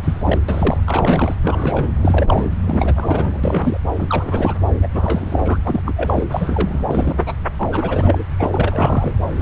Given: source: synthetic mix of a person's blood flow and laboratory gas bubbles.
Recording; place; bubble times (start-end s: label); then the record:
Doppler ultrasound of blood flow; subclavian vein
0.03-0.38 s: bubbles
0.48-0.81 s: bubbles
0.85-1.35 s: bubbles
1.43-1.95 s: bubbles
1.99-2.50 s: bubbles
2.67-3.80 s: bubbles
3.96-4.55 s: bubbles
4.81-4.88 s: bubbles
4.92-5.57 s: bubbles
5.63-5.81 s: bubbles
5.85-5.93 s: bubbles
5.96-6.25 s: bubbles
6.31-6.85 s: bubbles
6.88-7.33 s: bubbles
7.58-8.25 s: bubbles
8.38-9.15 s: bubbles
9.38-9.42 s: bubbles
From the record:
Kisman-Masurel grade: 342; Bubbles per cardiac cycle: rolling drumbeat, 9 or more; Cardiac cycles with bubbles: 100%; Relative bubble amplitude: moderate (0.250 to 0.450); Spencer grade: 3 (all of the cardiac periods contain showers or single bubble signals, but not dominating or overriding the cardiac motion signals); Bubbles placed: anywhere in the cardiac cycle